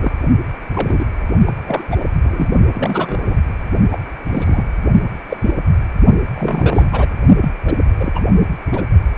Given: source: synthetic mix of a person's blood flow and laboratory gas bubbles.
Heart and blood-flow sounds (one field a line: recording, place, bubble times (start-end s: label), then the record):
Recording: Doppler ultrasound of blood flow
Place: precordium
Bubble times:
0.00-0.11 s: bubbles
0.75-1.04 s: bubbles
1.46-1.52 s: bubbles
1.66-1.85 s: bubbles
1.90-1.97 s: bubbles
2.00-2.04 s: bubbles
2.23-2.50 s: bubbles
2.75-3.19 s: bubbles
3.28-3.37 s: bubbles
3.92-3.98 s: bubbles
4.27-4.66 s: bubbles
5.29-5.37 s: bubbles
5.40-5.54 s: bubbles
6.34-7.08 s: bubbles
7.41-7.50 s: bubbles
7.64-7.74 s: bubbles
7.98-8.21 s: bubbles
8.72-8.83 s: bubbles
From the record:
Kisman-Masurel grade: 242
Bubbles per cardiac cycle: several, 3 to 8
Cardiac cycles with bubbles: 100%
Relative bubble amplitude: moderate (0.250 to 0.450)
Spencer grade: 3 (all of the cardiac periods contain showers or single bubble signals, but not dominating or overriding the cardiac motion signals)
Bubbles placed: only in the low amplitude regions of the cardiac cycle